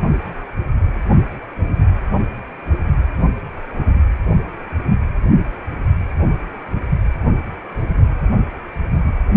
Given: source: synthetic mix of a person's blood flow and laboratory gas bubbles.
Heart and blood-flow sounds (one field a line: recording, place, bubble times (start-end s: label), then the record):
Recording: Doppler ultrasound of blood flow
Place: precordium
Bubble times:
no bubbles
From the record:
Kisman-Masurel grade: 000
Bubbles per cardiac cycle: 0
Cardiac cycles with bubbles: 0%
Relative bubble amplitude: no bubbles discernible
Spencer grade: 0 (complete lack of bubble signals)